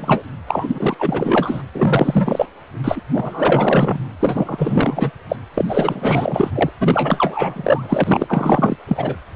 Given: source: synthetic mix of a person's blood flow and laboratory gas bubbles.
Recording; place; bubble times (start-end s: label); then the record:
Doppler ultrasound of blood flow; precordium
0.00-0.22 s: bubbles
0.47-1.63 s: bubbles
1.72-2.46 s: bubbles
2.84-3.01 s: bubbles
3.13-4.05 s: bubbles
4.20-5.10 s: bubbles
5.29-5.36 s: bubbles
5.54-5.65 s: bubbles
5.68-6.50 s: bubbles
6.54-6.71 s: bubbles
6.79-8.77 s: bubbles
8.88-9.17 s: bubbles
From the record:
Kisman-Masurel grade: 444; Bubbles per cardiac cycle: continuous sound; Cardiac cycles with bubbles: 100%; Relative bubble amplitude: maximal (0.775 to 0.999); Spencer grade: 4 (maximum detectable bubble signal sounding continuously throughout systole and diastole of every cardiac period, and overriding the amplitude of the normal cardiac signals); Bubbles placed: anywhere in the cardiac cycle